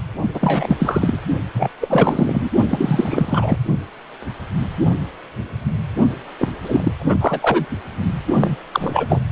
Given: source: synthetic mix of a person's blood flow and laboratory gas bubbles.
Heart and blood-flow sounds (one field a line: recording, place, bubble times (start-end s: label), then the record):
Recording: Doppler ultrasound of blood flow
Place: precordium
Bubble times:
0.34-0.76 s: bubbles
0.79-1.18 s: bubbles
1.53-1.69 s: bubbles
1.80-2.50 s: bubbles
2.67-3.58 s: bubbles
6.38-6.49 s: bubbles
6.63-6.92 s: bubbles
6.99-7.66 s: bubbles
8.29-8.57 s: bubbles
8.71-9.21 s: bubbles
From the record:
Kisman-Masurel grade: 333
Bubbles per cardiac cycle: rolling drumbeat, 9 or more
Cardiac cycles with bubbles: 50 to 99%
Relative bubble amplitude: loud (0.450 to 0.775)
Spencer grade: 3 (all of the cardiac periods contain showers or single bubble signals, but not dominating or overriding the cardiac motion signals)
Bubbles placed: only in the low amplitude regions of the cardiac cycle